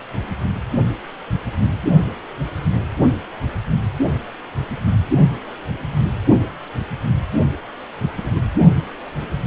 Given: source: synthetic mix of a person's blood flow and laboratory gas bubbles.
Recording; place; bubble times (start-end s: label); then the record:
Doppler ultrasound of blood flow; precordium
8.16-8.47 s: bubbles
From the record:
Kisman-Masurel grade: 121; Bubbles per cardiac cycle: 1 to 2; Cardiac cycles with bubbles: 10 to 50%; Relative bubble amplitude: barely perceptible (0.100 to 0.250); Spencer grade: 2 (many but less than half of the cardiac periods contain bubble signals, singularly or in groups); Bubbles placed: only in the low amplitude regions of the cardiac cycle